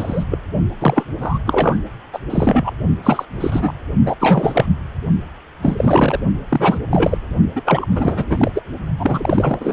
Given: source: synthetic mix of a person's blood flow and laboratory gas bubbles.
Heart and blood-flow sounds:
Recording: Doppler ultrasound of blood flow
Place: precordium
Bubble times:
0.00-0.23 s: bubbles
0.30-0.38 s: bubbles
0.79-1.04 s: bubbles
1.21-1.38 s: bubbles
1.46-1.79 s: bubbles
2.12-2.19 s: bubbles
2.29-2.71 s: bubbles
3.03-3.25 s: bubbles
3.31-3.73 s: bubbles
4.05-4.16 s: bubbles
4.20-4.67 s: bubbles
5.62-6.20 s: bubbles
6.49-6.78 s: bubbles
6.90-7.18 s: bubbles
7.55-7.62 s: bubbles
7.65-7.87 s: bubbles
7.95-8.26 s: bubbles
8.29-8.52 s: bubbles
8.54-8.62 s: bubbles
8.98-9.73 s: bubbles
From the record:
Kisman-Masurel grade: 343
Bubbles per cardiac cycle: rolling drumbeat, 9 or more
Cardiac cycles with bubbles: 100%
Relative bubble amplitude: loud (0.450 to 0.775)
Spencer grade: 3 (all of the cardiac periods contain showers or single bubble signals, but not dominating or overriding the cardiac motion signals)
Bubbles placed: only in the low amplitude regions of the cardiac cycle

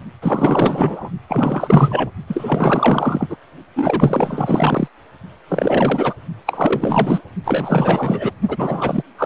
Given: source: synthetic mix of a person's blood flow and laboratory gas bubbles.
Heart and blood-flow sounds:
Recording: Doppler ultrasound of blood flow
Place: precordium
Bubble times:
0.21-1.09 s: bubbles
1.28-2.11 s: bubbles
2.28-3.37 s: bubbles
3.75-4.88 s: bubbles
5.48-6.13 s: bubbles
6.46-7.22 s: bubbles
7.44-8.32 s: bubbles
8.48-9.03 s: bubbles
9.18-9.26 s: bubbles
From the record:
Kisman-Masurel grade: 444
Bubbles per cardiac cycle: continuous sound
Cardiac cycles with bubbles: 100%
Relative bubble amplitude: maximal (0.775 to 0.999)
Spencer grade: 4 (maximum detectable bubble signal sounding continuously throughout systole and diastole of every cardiac period, and overriding the amplitude of the normal cardiac signals)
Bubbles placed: only in the low amplitude regions of the cardiac cycle

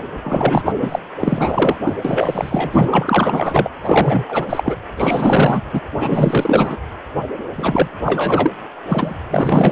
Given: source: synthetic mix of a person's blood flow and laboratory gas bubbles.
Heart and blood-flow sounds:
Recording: Doppler ultrasound of blood flow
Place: precordium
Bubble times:
0.24-1.00 s: bubbles
1.20-1.80 s: bubbles
1.84-1.93 s: bubbles
2.04-3.69 s: bubbles
3.82-4.24 s: bubbles
4.28-4.46 s: bubbles
4.49-4.75 s: bubbles
4.96-5.62 s: bubbles
5.73-5.81 s: bubbles
6.00-6.77 s: bubbles
7.56-7.88 s: bubbles
8.04-8.51 s: bubbles
8.89-9.16 s: bubbles
9.30-9.71 s: bubbles
From the record:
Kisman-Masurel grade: 444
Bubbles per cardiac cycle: continuous sound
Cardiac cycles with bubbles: 100%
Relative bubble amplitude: maximal (0.775 to 0.999)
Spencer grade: 4 (maximum detectable bubble signal sounding continuously throughout systole and diastole of every cardiac period, and overriding the amplitude of the normal cardiac signals)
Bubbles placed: anywhere in the cardiac cycle

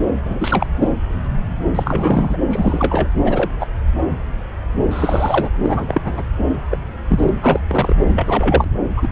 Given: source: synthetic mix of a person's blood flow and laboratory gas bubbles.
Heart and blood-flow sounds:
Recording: Doppler ultrasound of blood flow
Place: subclavian vein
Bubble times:
0.24-0.67 s: bubbles
0.79-0.89 s: bubbles
1.74-2.38 s: bubbles
2.50-3.08 s: bubbles
3.24-3.50 s: bubbles
3.59-3.67 s: bubbles
4.90-5.50 s: bubbles
5.62-6.01 s: bubbles
6.04-6.23 s: bubbles
6.71-6.78 s: bubbles
7.08-7.29 s: bubbles
7.42-7.60 s: bubbles
7.67-7.96 s: bubbles
8.15-8.69 s: bubbles
8.97-9.08 s: bubbles
From the record:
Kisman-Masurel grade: 233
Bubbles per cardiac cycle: several, 3 to 8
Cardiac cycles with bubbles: 50 to 99%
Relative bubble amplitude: loud (0.450 to 0.775)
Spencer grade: 3 (all of the cardiac periods contain showers or single bubble signals, but not dominating or overriding the cardiac motion signals)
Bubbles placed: anywhere in the cardiac cycle

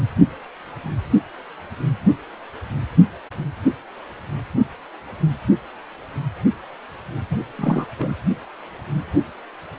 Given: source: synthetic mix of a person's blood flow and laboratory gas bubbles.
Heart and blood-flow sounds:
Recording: Doppler ultrasound of blood flow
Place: precordium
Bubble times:
7.29-7.37 s: bubbles
7.57-7.86 s: bubbles
7.99-8.15 s: bubbles
From the record:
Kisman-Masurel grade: 212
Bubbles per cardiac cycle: several, 3 to 8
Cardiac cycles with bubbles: 1 to 10%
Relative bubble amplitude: moderate (0.250 to 0.450)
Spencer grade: 1 (occasional bubble signal discernible with the cardiac motion signal, with majority of cardiac periods free of bubbles)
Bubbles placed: anywhere in the cardiac cycle

